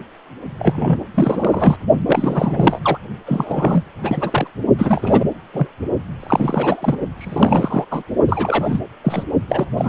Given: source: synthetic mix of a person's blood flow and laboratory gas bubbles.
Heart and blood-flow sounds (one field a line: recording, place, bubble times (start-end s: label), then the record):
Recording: Doppler ultrasound of blood flow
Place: precordium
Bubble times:
0.58-0.98 s: bubbles
1.14-1.76 s: bubbles
2.06-2.79 s: bubbles
2.83-2.99 s: bubbles
3.26-3.84 s: bubbles
3.98-4.47 s: bubbles
4.78-5.25 s: bubbles
5.54-5.67 s: bubbles
6.19-6.97 s: bubbles
7.17-7.85 s: bubbles
7.91-8.03 s: bubbles
8.28-8.80 s: bubbles
9.04-9.23 s: bubbles
9.48-9.66 s: bubbles
9.77-9.89 s: bubbles
From the record:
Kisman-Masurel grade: 343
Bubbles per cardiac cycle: rolling drumbeat, 9 or more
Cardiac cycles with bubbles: 100%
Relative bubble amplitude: loud (0.450 to 0.775)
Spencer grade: 3 (all of the cardiac periods contain showers or single bubble signals, but not dominating or overriding the cardiac motion signals)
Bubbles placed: only in the low amplitude regions of the cardiac cycle